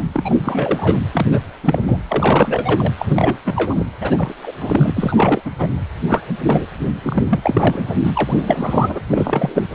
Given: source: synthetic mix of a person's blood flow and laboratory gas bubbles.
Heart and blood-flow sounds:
Doppler ultrasound of blood flow; precordium
0.00-0.04 s: bubbles
0.13-0.35 s: bubbles
0.38-0.98 s: bubbles
1.13-1.26 s: bubbles
1.31-1.41 s: bubbles
1.63-1.82 s: bubbles
1.87-1.98 s: bubbles
2.08-2.92 s: bubbles
2.98-3.38 s: bubbles
3.44-3.84 s: bubbles
4.00-4.33 s: bubbles
4.42-4.53 s: bubbles
4.60-4.93 s: bubbles
4.96-5.41 s: bubbles
5.45-5.50 s: bubbles
5.58-5.74 s: bubbles
6.07-6.22 s: bubbles
6.46-6.66 s: bubbles
7.03-7.24 s: bubbles
7.29-7.40 s: bubbles
7.43-7.95 s: bubbles
8.04-8.11 s: bubbles
8.13-8.99 s: bubbles
9.11-9.67 s: bubbles
From the record:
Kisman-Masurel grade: 343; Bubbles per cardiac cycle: rolling drumbeat, 9 or more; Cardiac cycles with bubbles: 100%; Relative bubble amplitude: loud (0.450 to 0.775); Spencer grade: 3 (all of the cardiac periods contain showers or single bubble signals, but not dominating or overriding the cardiac motion signals); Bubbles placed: anywhere in the cardiac cycle

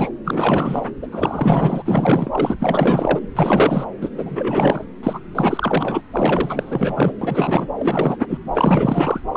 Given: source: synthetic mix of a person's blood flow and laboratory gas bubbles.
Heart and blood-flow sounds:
Doppler ultrasound of blood flow; subclavian vein
0.00-0.10 s: bubbles
0.25-0.86 s: bubbles
1.02-1.08 s: bubbles
1.11-2.55 s: bubbles
2.60-3.20 s: bubbles
3.35-3.85 s: bubbles
4.00-4.08 s: bubbles
4.12-4.84 s: bubbles
5.03-5.19 s: bubbles
5.35-6.01 s: bubbles
6.11-7.12 s: bubbles
7.21-7.67 s: bubbles
7.76-8.38 s: bubbles
8.54-9.20 s: bubbles
9.35-9.37 s: bubbles
From the record:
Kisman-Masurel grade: 444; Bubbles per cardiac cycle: continuous sound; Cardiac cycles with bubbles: 100%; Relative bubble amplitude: maximal (0.775 to 0.999); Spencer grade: 4 (maximum detectable bubble signal sounding continuously throughout systole and diastole of every cardiac period, and overriding the amplitude of the normal cardiac signals); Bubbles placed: anywhere in the cardiac cycle

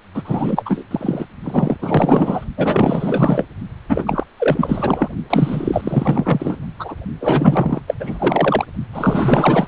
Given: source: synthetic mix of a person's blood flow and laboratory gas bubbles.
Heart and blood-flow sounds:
Doppler ultrasound of blood flow; precordium
0.14-0.84 s: bubbles
0.91-1.26 s: bubbles
1.44-1.77 s: bubbles
1.82-2.45 s: bubbles
2.57-3.45 s: bubbles
3.88-4.23 s: bubbles
4.38-5.09 s: bubbles
5.29-6.56 s: bubbles
6.79-6.94 s: bubbles
7.20-7.80 s: bubbles
7.87-7.95 s: bubbles
7.99-8.65 s: bubbles
8.93-9.67 s: bubbles
From the record:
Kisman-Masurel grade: 444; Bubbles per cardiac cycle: continuous sound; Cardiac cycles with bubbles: 100%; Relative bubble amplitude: maximal (0.775 to 0.999); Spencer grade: 4 (maximum detectable bubble signal sounding continuously throughout systole and diastole of every cardiac period, and overriding the amplitude of the normal cardiac signals); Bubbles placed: only in the low amplitude regions of the cardiac cycle

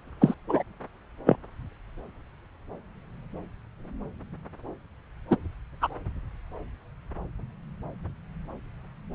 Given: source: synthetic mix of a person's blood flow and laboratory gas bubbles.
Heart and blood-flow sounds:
Doppler ultrasound of blood flow; subclavian vein
0.21-0.35 s: bubbles
0.49-0.63 s: bubbles
1.26-1.36 s: bubbles
5.30-5.37 s: bubbles
5.81-5.88 s: bubbles
From the record:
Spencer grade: 2 (many but less than half of the cardiac periods contain bubble signals, singularly or in groups); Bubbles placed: anywhere in the cardiac cycle

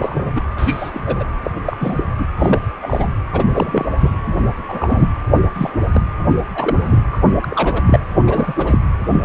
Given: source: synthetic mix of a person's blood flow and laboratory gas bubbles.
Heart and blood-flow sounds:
Doppler ultrasound of blood flow; precordium
0.00-0.32 s: bubbles
0.35-0.41 s: bubbles
0.57-0.91 s: bubbles
0.93-1.24 s: bubbles
1.44-1.51 s: bubbles
1.55-1.61 s: bubbles
1.66-2.04 s: bubbles
2.17-2.25 s: bubbles
2.37-2.65 s: bubbles
2.82-3.08 s: bubbles
3.32-3.44 s: bubbles
3.51-3.85 s: bubbles
3.97-4.12 s: bubbles
4.26-4.37 s: bubbles
4.68-5.08 s: bubbles
5.33-5.41 s: bubbles
5.54-5.70 s: bubbles
5.93-6.02 s: bubbles
6.54-6.75 s: bubbles
6.81-7.01 s: bubbles
7.12-7.17 s: bubbles
7.41-7.83 s: bubbles
7.86-8.00 s: bubbles
8.27-8.53 s: bubbles
8.58-8.79 s: bubbles
9.08-9.25 s: bubbles
From the record:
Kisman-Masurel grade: 242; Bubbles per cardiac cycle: several, 3 to 8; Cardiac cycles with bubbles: 100%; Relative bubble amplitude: moderate (0.250 to 0.450); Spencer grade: 3 (all of the cardiac periods contain showers or single bubble signals, but not dominating or overriding the cardiac motion signals); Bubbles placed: anywhere in the cardiac cycle

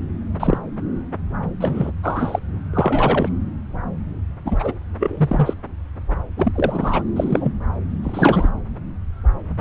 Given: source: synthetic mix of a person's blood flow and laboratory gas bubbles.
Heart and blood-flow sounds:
Doppler ultrasound of blood flow; subclavian vein
0.40-0.59 s: bubbles
1.60-1.93 s: bubbles
2.03-2.39 s: bubbles
2.74-3.29 s: bubbles
4.44-4.73 s: bubbles
4.99-5.54 s: bubbles
6.37-6.52 s: bubbles
6.54-7.02 s: bubbles
7.16-7.52 s: bubbles
8.03-8.49 s: bubbles
From the record:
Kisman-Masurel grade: 232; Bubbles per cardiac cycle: several, 3 to 8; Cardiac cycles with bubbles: 50 to 99%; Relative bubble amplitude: moderate (0.250 to 0.450); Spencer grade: 3 (all of the cardiac periods contain showers or single bubble signals, but not dominating or overriding the cardiac motion signals); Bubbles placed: anywhere in the cardiac cycle

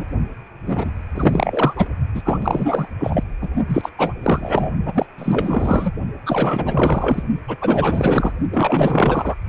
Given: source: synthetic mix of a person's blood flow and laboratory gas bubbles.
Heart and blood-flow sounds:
Doppler ultrasound of blood flow; precordium
0.00-0.04 s: bubbles
0.66-0.91 s: bubbles
1.14-1.90 s: bubbles
2.14-2.88 s: bubbles
2.99-3.24 s: bubbles
3.41-3.49 s: bubbles
3.68-3.90 s: bubbles
3.98-4.14 s: bubbles
4.23-4.72 s: bubbles
4.85-5.05 s: bubbles
5.18-5.92 s: bubbles
6.26-7.23 s: bubbles
7.48-7.57 s: bubbles
7.61-8.33 s: bubbles
8.52-9.36 s: bubbles
From the record:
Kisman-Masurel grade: 444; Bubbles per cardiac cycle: continuous sound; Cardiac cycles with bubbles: 100%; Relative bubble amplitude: maximal (0.775 to 0.999); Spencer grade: 4 (maximum detectable bubble signal sounding continuously throughout systole and diastole of every cardiac period, and overriding the amplitude of the normal cardiac signals); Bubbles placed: only in the low amplitude regions of the cardiac cycle

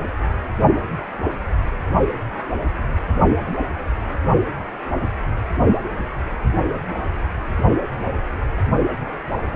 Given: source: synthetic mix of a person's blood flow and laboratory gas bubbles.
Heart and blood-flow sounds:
Doppler ultrasound of blood flow; precordium
no bubbles
From the record:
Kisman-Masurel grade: 000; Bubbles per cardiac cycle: 0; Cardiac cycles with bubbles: 0%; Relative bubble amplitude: no bubbles discernible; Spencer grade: 0 (complete lack of bubble signals)

